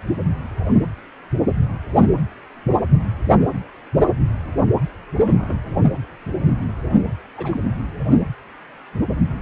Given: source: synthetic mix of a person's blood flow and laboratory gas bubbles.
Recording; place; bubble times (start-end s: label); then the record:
Doppler ultrasound of blood flow; precordium
5.17-5.55 s: bubbles
7.37-7.60 s: bubbles
From the record:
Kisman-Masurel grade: 121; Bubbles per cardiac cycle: 1 to 2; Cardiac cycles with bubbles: 10 to 50%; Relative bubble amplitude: barely perceptible (0.100 to 0.250); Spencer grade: 2 (many but less than half of the cardiac periods contain bubble signals, singularly or in groups); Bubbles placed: only in the low amplitude regions of the cardiac cycle